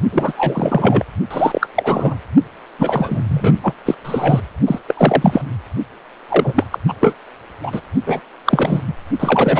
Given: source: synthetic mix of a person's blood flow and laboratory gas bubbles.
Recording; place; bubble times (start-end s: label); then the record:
Doppler ultrasound of blood flow; precordium
0.12-0.33 s: bubbles
0.35-1.05 s: bubbles
1.31-1.67 s: bubbles
1.75-2.15 s: bubbles
2.78-3.23 s: bubbles
3.27-3.58 s: bubbles
3.61-3.73 s: bubbles
3.85-3.95 s: bubbles
4.04-4.44 s: bubbles
4.67-4.79 s: bubbles
4.88-4.94 s: bubbles
4.97-5.42 s: bubbles
6.29-6.64 s: bubbles
6.71-6.79 s: bubbles
6.88-6.94 s: bubbles
7.00-7.14 s: bubbles
7.63-7.80 s: bubbles
8.06-8.21 s: bubbles
8.45-8.81 s: bubbles
8.87-8.93 s: bubbles
9.20-9.60 s: bubbles
From the record:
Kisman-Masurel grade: 343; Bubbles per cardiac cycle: rolling drumbeat, 9 or more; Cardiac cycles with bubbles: 100%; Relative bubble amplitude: loud (0.450 to 0.775); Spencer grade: 3 (all of the cardiac periods contain showers or single bubble signals, but not dominating or overriding the cardiac motion signals); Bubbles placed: only in the low amplitude regions of the cardiac cycle